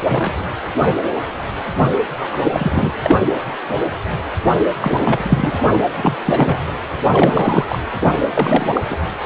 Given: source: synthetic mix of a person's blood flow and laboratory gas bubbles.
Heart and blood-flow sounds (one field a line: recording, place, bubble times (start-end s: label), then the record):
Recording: Doppler ultrasound of blood flow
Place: precordium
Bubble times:
0.00-0.03 s: bubbles
0.08-0.47 s: bubbles
2.20-2.28 s: bubbles
2.31-2.40 s: bubbles
2.43-2.94 s: bubbles
3.03-3.16 s: bubbles
4.80-5.61 s: bubbles
5.71-5.78 s: bubbles
5.96-6.17 s: bubbles
6.25-6.56 s: bubbles
7.12-7.65 s: bubbles
7.70-7.80 s: bubbles
8.00-8.08 s: bubbles
8.37-8.80 s: bubbles
8.90-8.96 s: bubbles
From the record:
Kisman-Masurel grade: 333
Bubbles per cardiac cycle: rolling drumbeat, 9 or more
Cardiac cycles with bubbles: 50 to 99%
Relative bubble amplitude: loud (0.450 to 0.775)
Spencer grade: 3 (all of the cardiac periods contain showers or single bubble signals, but not dominating or overriding the cardiac motion signals)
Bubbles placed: anywhere in the cardiac cycle